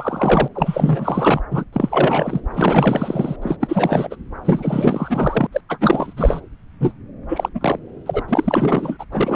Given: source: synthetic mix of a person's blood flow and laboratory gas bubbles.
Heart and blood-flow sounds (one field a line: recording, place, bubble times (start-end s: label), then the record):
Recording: Doppler ultrasound of blood flow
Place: subclavian vein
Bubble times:
0.00-0.48 s: bubbles
0.55-1.41 s: bubbles
1.51-1.65 s: bubbles
1.73-2.42 s: bubbles
2.51-3.37 s: bubbles
3.42-3.57 s: bubbles
3.60-4.16 s: bubbles
4.44-5.46 s: bubbles
5.52-5.61 s: bubbles
5.69-6.13 s: bubbles
6.17-6.41 s: bubbles
6.79-6.94 s: bubbles
7.29-7.49 s: bubbles
7.54-7.79 s: bubbles
8.06-8.23 s: bubbles
8.28-9.05 s: bubbles
9.12-9.36 s: bubbles
From the record:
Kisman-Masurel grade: 444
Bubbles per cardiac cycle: continuous sound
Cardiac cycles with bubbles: 100%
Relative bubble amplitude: maximal (0.775 to 0.999)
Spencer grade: 4 (maximum detectable bubble signal sounding continuously throughout systole and diastole of every cardiac period, and overriding the amplitude of the normal cardiac signals)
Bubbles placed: anywhere in the cardiac cycle